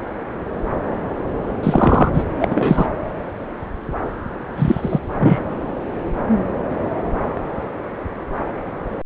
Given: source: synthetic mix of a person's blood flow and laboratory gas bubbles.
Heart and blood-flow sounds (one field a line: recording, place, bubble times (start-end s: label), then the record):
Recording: Doppler ultrasound of blood flow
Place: subclavian vein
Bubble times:
1.63-2.11 s: bubbles
2.14-2.24 s: bubbles
2.40-2.87 s: bubbles
4.56-4.99 s: bubbles
5.19-5.45 s: bubbles
From the record:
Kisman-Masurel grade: 223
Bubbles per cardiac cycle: several, 3 to 8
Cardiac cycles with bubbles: 10 to 50%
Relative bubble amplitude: loud (0.450 to 0.775)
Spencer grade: 2 (many but less than half of the cardiac periods contain bubble signals, singularly or in groups)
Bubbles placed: anywhere in the cardiac cycle